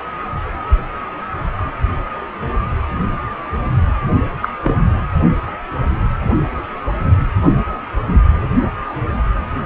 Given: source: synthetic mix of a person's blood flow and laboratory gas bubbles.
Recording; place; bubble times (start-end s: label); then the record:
Doppler ultrasound of blood flow; precordium
4.42-4.48 s: bubbles
4.63-4.84 s: bubbles
From the record:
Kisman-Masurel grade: 113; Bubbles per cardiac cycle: 1 to 2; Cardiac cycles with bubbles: 1 to 10%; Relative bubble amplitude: loud (0.450 to 0.775); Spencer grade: 1 (occasional bubble signal discernible with the cardiac motion signal, with majority of cardiac periods free of bubbles); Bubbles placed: only in the low amplitude regions of the cardiac cycle